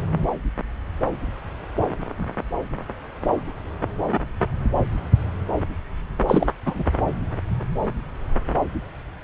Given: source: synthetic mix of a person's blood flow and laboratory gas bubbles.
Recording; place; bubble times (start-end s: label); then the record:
Doppler ultrasound of blood flow; subclavian vein
6.25-6.49 s: bubbles
6.66-6.83 s: bubbles
From the record:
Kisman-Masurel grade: 212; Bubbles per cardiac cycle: several, 3 to 8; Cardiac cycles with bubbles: 1 to 10%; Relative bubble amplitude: moderate (0.250 to 0.450); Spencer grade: 1 (occasional bubble signal discernible with the cardiac motion signal, with majority of cardiac periods free of bubbles); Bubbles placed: anywhere in the cardiac cycle